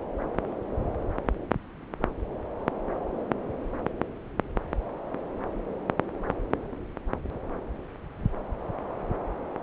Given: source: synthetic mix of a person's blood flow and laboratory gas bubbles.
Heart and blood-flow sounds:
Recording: Doppler ultrasound of blood flow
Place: subclavian vein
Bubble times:
no bubbles
From the record:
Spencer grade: 0 (complete lack of bubble signals)

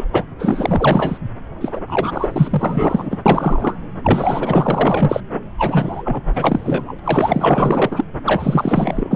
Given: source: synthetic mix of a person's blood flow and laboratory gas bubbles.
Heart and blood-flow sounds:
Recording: Doppler ultrasound of blood flow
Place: subclavian vein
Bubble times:
0.00-0.05 s: bubbles
0.12-0.24 s: bubbles
0.39-1.18 s: bubbles
1.61-1.80 s: bubbles
1.87-3.18 s: bubbles
3.25-3.75 s: bubbles
4.03-5.21 s: bubbles
5.58-6.21 s: bubbles
6.34-7.00 s: bubbles
7.04-8.04 s: bubbles
8.25-9.16 s: bubbles
From the record:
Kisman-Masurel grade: 444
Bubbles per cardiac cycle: continuous sound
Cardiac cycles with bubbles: 100%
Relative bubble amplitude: maximal (0.775 to 0.999)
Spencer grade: 4 (maximum detectable bubble signal sounding continuously throughout systole and diastole of every cardiac period, and overriding the amplitude of the normal cardiac signals)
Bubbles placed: anywhere in the cardiac cycle

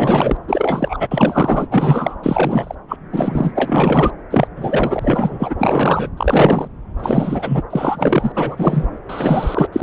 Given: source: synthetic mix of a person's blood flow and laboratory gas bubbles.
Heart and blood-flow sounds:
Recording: Doppler ultrasound of blood flow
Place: subclavian vein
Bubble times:
0.00-0.37 s: bubbles
0.48-1.07 s: bubbles
1.11-1.67 s: bubbles
1.71-2.16 s: bubbles
2.23-2.75 s: bubbles
2.88-2.96 s: bubbles
3.12-3.52 s: bubbles
3.55-4.10 s: bubbles
4.30-4.47 s: bubbles
4.56-5.54 s: bubbles
5.58-6.10 s: bubbles
6.17-6.68 s: bubbles
7.00-7.62 s: bubbles
7.70-8.32 s: bubbles
8.35-8.86 s: bubbles
9.09-9.68 s: bubbles
9.72-9.83 s: bubbles
From the record:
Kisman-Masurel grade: 343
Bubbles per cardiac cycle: rolling drumbeat, 9 or more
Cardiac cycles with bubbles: 100%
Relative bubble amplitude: loud (0.450 to 0.775)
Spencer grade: 3 (all of the cardiac periods contain showers or single bubble signals, but not dominating or overriding the cardiac motion signals)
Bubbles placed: anywhere in the cardiac cycle

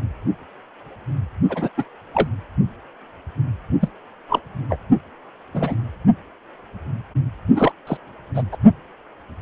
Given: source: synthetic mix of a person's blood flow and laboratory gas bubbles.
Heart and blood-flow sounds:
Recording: Doppler ultrasound of blood flow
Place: precordium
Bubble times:
1.49-1.69 s: bubbles
1.77-1.84 s: bubbles
2.14-2.29 s: bubbles
3.80-3.88 s: bubbles
4.29-4.40 s: bubbles
4.69-4.78 s: bubbles
5.54-5.87 s: bubbles
7.55-7.72 s: bubbles
7.87-7.97 s: bubbles
8.35-8.43 s: bubbles
8.52-8.57 s: bubbles
From the record:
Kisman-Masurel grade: 222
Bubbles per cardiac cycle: several, 3 to 8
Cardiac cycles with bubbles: 10 to 50%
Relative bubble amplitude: moderate (0.250 to 0.450)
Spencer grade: 2 (many but less than half of the cardiac periods contain bubble signals, singularly or in groups)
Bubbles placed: only in the low amplitude regions of the cardiac cycle

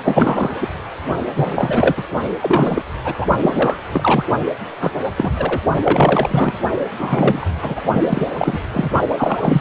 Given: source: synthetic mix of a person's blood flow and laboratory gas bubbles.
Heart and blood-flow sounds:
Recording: Doppler ultrasound of blood flow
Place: precordium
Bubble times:
0.04-0.67 s: bubbles
1.36-2.04 s: bubbles
2.40-2.83 s: bubbles
3.04-3.25 s: bubbles
3.42-3.79 s: bubbles
3.92-4.25 s: bubbles
4.80-4.92 s: bubbles
5.14-5.31 s: bubbles
5.38-5.61 s: bubbles
5.84-6.54 s: bubbles
6.99-7.49 s: bubbles
7.62-7.81 s: bubbles
7.92-8.69 s: bubbles
8.74-8.91 s: bubbles
9.10-9.61 s: bubbles
From the record:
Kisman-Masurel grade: 343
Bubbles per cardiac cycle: rolling drumbeat, 9 or more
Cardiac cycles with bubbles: 100%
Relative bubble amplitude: loud (0.450 to 0.775)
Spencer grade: 3 (all of the cardiac periods contain showers or single bubble signals, but not dominating or overriding the cardiac motion signals)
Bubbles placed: only in the low amplitude regions of the cardiac cycle

